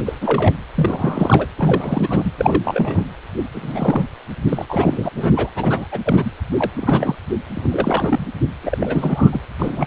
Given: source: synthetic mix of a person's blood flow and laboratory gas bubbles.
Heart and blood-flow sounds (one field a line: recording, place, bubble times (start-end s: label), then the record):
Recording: Doppler ultrasound of blood flow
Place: precordium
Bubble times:
0.00-0.02 s: bubbles
0.06-0.55 s: bubbles
0.76-1.47 s: bubbles
1.57-2.31 s: bubbles
2.38-3.04 s: bubbles
3.52-4.04 s: bubbles
4.48-4.65 s: bubbles
4.68-5.10 s: bubbles
5.15-5.50 s: bubbles
5.55-5.86 s: bubbles
5.91-5.99 s: bubbles
6.04-6.30 s: bubbles
6.57-6.70 s: bubbles
6.77-7.15 s: bubbles
7.55-8.25 s: bubbles
8.63-8.78 s: bubbles
8.80-9.39 s: bubbles
9.59-9.87 s: bubbles
From the record:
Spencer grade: 3 (all of the cardiac periods contain showers or single bubble signals, but not dominating or overriding the cardiac motion signals)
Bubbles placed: anywhere in the cardiac cycle